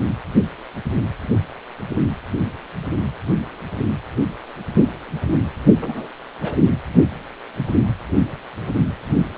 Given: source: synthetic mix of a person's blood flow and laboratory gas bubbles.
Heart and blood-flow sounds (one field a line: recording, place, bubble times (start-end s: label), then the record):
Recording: Doppler ultrasound of blood flow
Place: precordium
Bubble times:
5.80-6.07 s: bubbles
6.42-6.57 s: bubbles
From the record:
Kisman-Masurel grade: 111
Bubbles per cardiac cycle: 1 to 2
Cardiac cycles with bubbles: 1 to 10%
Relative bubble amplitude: barely perceptible (0.100 to 0.250)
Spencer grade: 1 (occasional bubble signal discernible with the cardiac motion signal, with majority of cardiac periods free of bubbles)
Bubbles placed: anywhere in the cardiac cycle